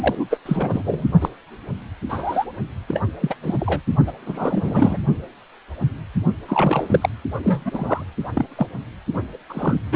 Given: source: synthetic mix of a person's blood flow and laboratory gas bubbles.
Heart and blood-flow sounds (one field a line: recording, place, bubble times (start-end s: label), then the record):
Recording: Doppler ultrasound of blood flow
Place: precordium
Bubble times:
0.01-0.28 s: bubbles
0.30-0.39 s: bubbles
0.46-1.06 s: bubbles
1.21-1.29 s: bubbles
2.09-2.45 s: bubbles
2.88-3.01 s: bubbles
3.21-3.35 s: bubbles
3.42-3.81 s: bubbles
4.07-4.12 s: bubbles
4.26-4.97 s: bubbles
6.48-7.09 s: bubbles
7.42-8.05 s: bubbles
8.35-8.46 s: bubbles
8.57-8.66 s: bubbles
9.14-9.21 s: bubbles
9.49-9.79 s: bubbles
9.92-9.96 s: bubbles
From the record:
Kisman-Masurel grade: 232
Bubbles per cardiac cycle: several, 3 to 8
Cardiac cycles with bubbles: 50 to 99%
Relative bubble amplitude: moderate (0.250 to 0.450)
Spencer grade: 3 (all of the cardiac periods contain showers or single bubble signals, but not dominating or overriding the cardiac motion signals)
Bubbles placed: only in the low amplitude regions of the cardiac cycle